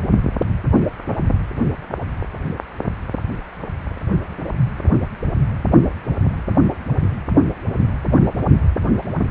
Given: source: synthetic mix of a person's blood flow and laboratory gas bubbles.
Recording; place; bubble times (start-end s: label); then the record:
Doppler ultrasound of blood flow; precordium
0.80-0.87 s: bubbles
From the record:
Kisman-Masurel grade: 111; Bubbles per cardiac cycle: 1 to 2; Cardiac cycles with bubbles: 1 to 10%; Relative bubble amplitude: barely perceptible (0.100 to 0.250); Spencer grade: 1 (occasional bubble signal discernible with the cardiac motion signal, with majority of cardiac periods free of bubbles); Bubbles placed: only in the low amplitude regions of the cardiac cycle